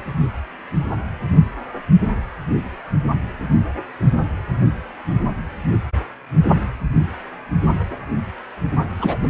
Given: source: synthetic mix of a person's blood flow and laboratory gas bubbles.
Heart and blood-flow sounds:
Doppler ultrasound of blood flow; precordium
8.96-9.17 s: bubbles
9.21-9.30 s: bubbles
From the record:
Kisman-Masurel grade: 212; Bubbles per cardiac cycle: several, 3 to 8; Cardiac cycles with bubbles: 1 to 10%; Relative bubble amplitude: moderate (0.250 to 0.450); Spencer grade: 1 (occasional bubble signal discernible with the cardiac motion signal, with majority of cardiac periods free of bubbles); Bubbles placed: only in the low amplitude regions of the cardiac cycle

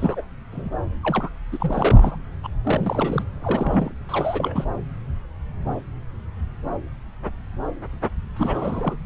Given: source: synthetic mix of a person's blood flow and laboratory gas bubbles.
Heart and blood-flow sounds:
Doppler ultrasound of blood flow; subclavian vein
0.00-0.22 s: bubbles
0.52-0.70 s: bubbles
1.02-1.30 s: bubbles
1.52-2.17 s: bubbles
2.43-2.48 s: bubbles
2.65-3.24 s: bubbles
3.42-3.92 s: bubbles
4.08-4.65 s: bubbles
8.36-8.96 s: bubbles
From the record:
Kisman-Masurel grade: 332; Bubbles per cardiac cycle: rolling drumbeat, 9 or more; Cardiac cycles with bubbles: 50 to 99%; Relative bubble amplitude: moderate (0.250 to 0.450); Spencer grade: 3 (all of the cardiac periods contain showers or single bubble signals, but not dominating or overriding the cardiac motion signals); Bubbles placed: anywhere in the cardiac cycle

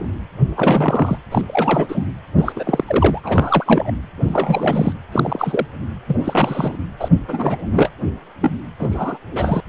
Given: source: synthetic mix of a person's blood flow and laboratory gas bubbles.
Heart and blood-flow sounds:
Doppler ultrasound of blood flow; precordium
0.00-0.15 s: bubbles
0.56-1.18 s: bubbles
1.31-1.42 s: bubbles
1.48-2.07 s: bubbles
2.37-2.53 s: bubbles
2.55-2.84 s: bubbles
2.87-3.92 s: bubbles
4.21-4.92 s: bubbles
5.11-5.66 s: bubbles
6.08-6.77 s: bubbles
7.00-7.08 s: bubbles
7.28-7.90 s: bubbles
8.41-8.58 s: bubbles
8.79-9.18 s: bubbles
9.32-9.61 s: bubbles
From the record:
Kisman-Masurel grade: 342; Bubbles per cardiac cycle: rolling drumbeat, 9 or more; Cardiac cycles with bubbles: 100%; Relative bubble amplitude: moderate (0.250 to 0.450); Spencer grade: 3 (all of the cardiac periods contain showers or single bubble signals, but not dominating or overriding the cardiac motion signals); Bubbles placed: anywhere in the cardiac cycle

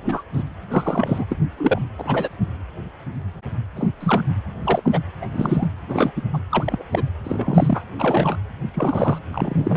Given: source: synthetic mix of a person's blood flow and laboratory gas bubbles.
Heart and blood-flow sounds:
Doppler ultrasound of blood flow; precordium
0.04-0.23 s: bubbles
0.33-0.43 s: bubbles
0.70-1.26 s: bubbles
1.30-1.38 s: bubbles
1.57-1.82 s: bubbles
1.98-2.28 s: bubbles
3.76-3.91 s: bubbles
4.00-4.24 s: bubbles
4.59-5.00 s: bubbles
5.21-5.26 s: bubbles
5.33-5.68 s: bubbles
5.88-6.12 s: bubbles
6.16-6.22 s: bubbles
6.33-6.39 s: bubbles
6.50-6.84 s: bubbles
6.92-7.10 s: bubbles
7.24-7.82 s: bubbles
7.98-8.37 s: bubbles
8.74-9.19 s: bubbles
9.33-9.77 s: bubbles
From the record:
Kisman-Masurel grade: 232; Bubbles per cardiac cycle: several, 3 to 8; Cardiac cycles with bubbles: 50 to 99%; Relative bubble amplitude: moderate (0.250 to 0.450); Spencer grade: 3 (all of the cardiac periods contain showers or single bubble signals, but not dominating or overriding the cardiac motion signals); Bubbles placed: anywhere in the cardiac cycle

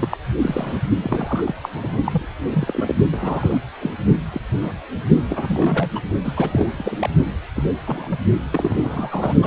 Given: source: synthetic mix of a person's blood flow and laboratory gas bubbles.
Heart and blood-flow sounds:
Doppler ultrasound of blood flow; precordium
0.00-0.09 s: bubbles
0.11-0.18 s: bubbles
0.41-0.81 s: bubbles
1.03-1.54 s: bubbles
1.62-1.69 s: bubbles
1.74-1.97 s: bubbles
2.04-2.25 s: bubbles
2.50-2.95 s: bubbles
3.12-3.58 s: bubbles
3.81-3.94 s: bubbles
4.32-4.41 s: bubbles
4.62-4.73 s: bubbles
5.29-5.89 s: bubbles
5.95-6.00 s: bubbles
6.24-6.33 s: bubbles
6.36-7.08 s: bubbles
7.56-7.62 s: bubbles
7.86-8.20 s: bubbles
8.51-9.34 s: bubbles
9.42-9.47 s: bubbles
From the record:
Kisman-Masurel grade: 242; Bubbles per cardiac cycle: several, 3 to 8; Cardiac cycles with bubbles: 100%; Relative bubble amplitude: moderate (0.250 to 0.450); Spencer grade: 3 (all of the cardiac periods contain showers or single bubble signals, but not dominating or overriding the cardiac motion signals); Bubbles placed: only in the low amplitude regions of the cardiac cycle

